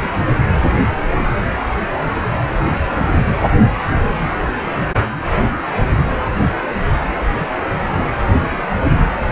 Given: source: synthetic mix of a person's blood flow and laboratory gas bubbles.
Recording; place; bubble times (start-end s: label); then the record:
Doppler ultrasound of blood flow; precordium
0.00-0.10 s: bubbles
From the record:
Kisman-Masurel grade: 111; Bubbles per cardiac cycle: 1 to 2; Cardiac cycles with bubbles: 1 to 10%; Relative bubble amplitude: barely perceptible (0.100 to 0.250); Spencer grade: 1 (occasional bubble signal discernible with the cardiac motion signal, with majority of cardiac periods free of bubbles); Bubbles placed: anywhere in the cardiac cycle